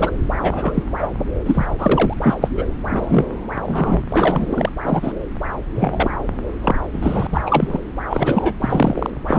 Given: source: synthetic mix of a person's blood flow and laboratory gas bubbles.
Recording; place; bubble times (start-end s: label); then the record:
Doppler ultrasound of blood flow; subclavian vein
0.00-0.14 s: bubbles
0.41-0.83 s: bubbles
0.99-1.08 s: bubbles
1.45-1.67 s: bubbles
1.78-2.13 s: bubbles
2.21-2.35 s: bubbles
2.41-2.50 s: bubbles
2.55-2.66 s: bubbles
2.90-3.25 s: bubbles
3.63-4.00 s: bubbles
4.08-4.69 s: bubbles
4.84-5.12 s: bubbles
5.75-6.16 s: bubbles
6.62-6.79 s: bubbles
6.92-7.27 s: bubbles
7.31-7.41 s: bubbles
7.46-7.80 s: bubbles
8.10-8.54 s: bubbles
8.61-9.10 s: bubbles
9.26-9.38 s: bubbles
From the record:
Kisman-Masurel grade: 243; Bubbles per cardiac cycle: several, 3 to 8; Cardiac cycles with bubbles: 100%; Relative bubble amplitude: loud (0.450 to 0.775); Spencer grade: 3 (all of the cardiac periods contain showers or single bubble signals, but not dominating or overriding the cardiac motion signals); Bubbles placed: anywhere in the cardiac cycle